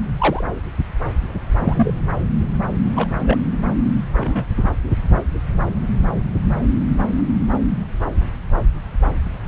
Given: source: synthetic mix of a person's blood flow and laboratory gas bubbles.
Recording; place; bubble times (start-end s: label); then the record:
Doppler ultrasound of blood flow; subclavian vein
0.18-0.44 s: bubbles
1.55-1.92 s: bubbles
2.96-3.08 s: bubbles
3.23-3.42 s: bubbles
4.13-4.46 s: bubbles
From the record:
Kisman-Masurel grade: 122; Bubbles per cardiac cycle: 1 to 2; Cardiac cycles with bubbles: 10 to 50%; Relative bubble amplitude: moderate (0.250 to 0.450); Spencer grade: 2 (many but less than half of the cardiac periods contain bubble signals, singularly or in groups); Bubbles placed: anywhere in the cardiac cycle